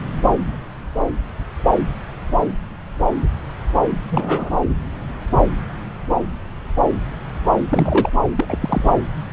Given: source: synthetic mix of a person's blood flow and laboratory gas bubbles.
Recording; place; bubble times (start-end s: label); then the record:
Doppler ultrasound of blood flow; subclavian vein
4.10-4.50 s: bubbles
7.71-8.10 s: bubbles
8.36-8.46 s: bubbles
8.48-8.94 s: bubbles
From the record:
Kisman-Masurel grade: 222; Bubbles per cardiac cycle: several, 3 to 8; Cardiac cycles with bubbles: 10 to 50%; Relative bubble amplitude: moderate (0.250 to 0.450); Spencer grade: 2 (many but less than half of the cardiac periods contain bubble signals, singularly or in groups); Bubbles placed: anywhere in the cardiac cycle